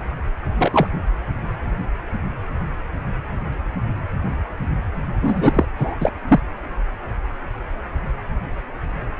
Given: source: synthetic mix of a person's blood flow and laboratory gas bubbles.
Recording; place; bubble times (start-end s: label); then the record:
Doppler ultrasound of blood flow; precordium
0.58-0.87 s: bubbles
5.21-5.65 s: bubbles
5.76-5.96 s: bubbles
6.00-6.11 s: bubbles
6.28-6.40 s: bubbles
From the record:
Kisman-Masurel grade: 223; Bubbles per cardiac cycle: several, 3 to 8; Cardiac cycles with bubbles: 10 to 50%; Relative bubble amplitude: loud (0.450 to 0.775); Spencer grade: 2 (many but less than half of the cardiac periods contain bubble signals, singularly or in groups); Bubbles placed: anywhere in the cardiac cycle